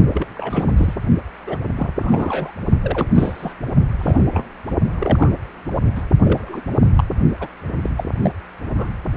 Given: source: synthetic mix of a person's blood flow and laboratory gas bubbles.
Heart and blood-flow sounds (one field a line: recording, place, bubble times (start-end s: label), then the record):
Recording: Doppler ultrasound of blood flow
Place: precordium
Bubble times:
0.14-0.27 s: bubbles
0.34-0.73 s: bubbles
0.76-0.94 s: bubbles
1.46-1.58 s: bubbles
1.77-1.91 s: bubbles
1.98-2.52 s: bubbles
2.83-3.06 s: bubbles
3.15-3.54 s: bubbles
3.99-4.24 s: bubbles
4.31-4.49 s: bubbles
4.98-5.32 s: bubbles
5.96-6.02 s: bubbles
6.22-6.61 s: bubbles
6.96-7.04 s: bubbles
7.40-7.47 s: bubbles
7.82-7.90 s: bubbles
7.97-8.04 s: bubbles
8.18-8.32 s: bubbles
8.69-8.88 s: bubbles
From the record:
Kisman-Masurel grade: 232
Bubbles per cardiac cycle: several, 3 to 8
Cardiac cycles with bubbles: 50 to 99%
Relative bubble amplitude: moderate (0.250 to 0.450)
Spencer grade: 3 (all of the cardiac periods contain showers or single bubble signals, but not dominating or overriding the cardiac motion signals)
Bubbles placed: only in the low amplitude regions of the cardiac cycle